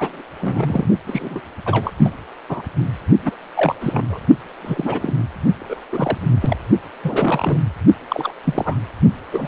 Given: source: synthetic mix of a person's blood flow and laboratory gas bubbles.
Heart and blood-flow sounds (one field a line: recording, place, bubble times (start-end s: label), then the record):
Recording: Doppler ultrasound of blood flow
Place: precordium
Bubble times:
0.00-0.22 s: bubbles
0.40-0.88 s: bubbles
1.07-1.41 s: bubbles
1.65-1.91 s: bubbles
1.98-2.10 s: bubbles
2.49-2.62 s: bubbles
3.25-3.31 s: bubbles
3.56-3.75 s: bubbles
3.81-4.20 s: bubbles
4.56-5.27 s: bubbles
5.59-5.79 s: bubbles
5.92-6.17 s: bubbles
6.41-6.57 s: bubbles
7.04-7.58 s: bubbles
8.10-8.32 s: bubbles
8.44-8.77 s: bubbles
9.32-9.48 s: bubbles
From the record:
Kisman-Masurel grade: 242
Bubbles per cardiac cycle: several, 3 to 8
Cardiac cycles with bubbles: 100%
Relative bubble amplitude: moderate (0.250 to 0.450)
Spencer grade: 3 (all of the cardiac periods contain showers or single bubble signals, but not dominating or overriding the cardiac motion signals)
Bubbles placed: only in the low amplitude regions of the cardiac cycle